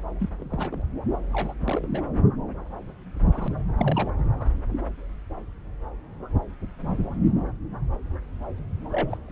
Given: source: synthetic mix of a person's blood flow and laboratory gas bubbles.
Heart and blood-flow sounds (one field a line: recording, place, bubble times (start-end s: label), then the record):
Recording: Doppler ultrasound of blood flow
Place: subclavian vein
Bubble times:
0.19-0.29 s: bubbles
0.38-0.82 s: bubbles
1.33-1.53 s: bubbles
1.60-1.90 s: bubbles
1.93-2.01 s: bubbles
3.28-3.48 s: bubbles
3.78-4.11 s: bubbles
4.17-4.27 s: bubbles
4.33-4.47 s: bubbles
8.92-9.17 s: bubbles
9.26-9.32 s: bubbles
From the record:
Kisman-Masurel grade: 221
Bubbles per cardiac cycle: several, 3 to 8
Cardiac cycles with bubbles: 10 to 50%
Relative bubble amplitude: barely perceptible (0.100 to 0.250)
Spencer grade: 2 (many but less than half of the cardiac periods contain bubble signals, singularly or in groups)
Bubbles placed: anywhere in the cardiac cycle